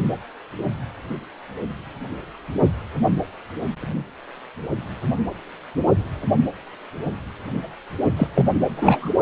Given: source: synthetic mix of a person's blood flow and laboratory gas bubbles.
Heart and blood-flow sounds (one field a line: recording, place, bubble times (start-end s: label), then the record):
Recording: Doppler ultrasound of blood flow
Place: precordium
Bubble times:
8.16-8.27 s: bubbles
8.35-8.47 s: bubbles
8.76-9.10 s: bubbles
From the record:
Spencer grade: 1 (occasional bubble signal discernible with the cardiac motion signal, with majority of cardiac periods free of bubbles)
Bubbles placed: only in the low amplitude regions of the cardiac cycle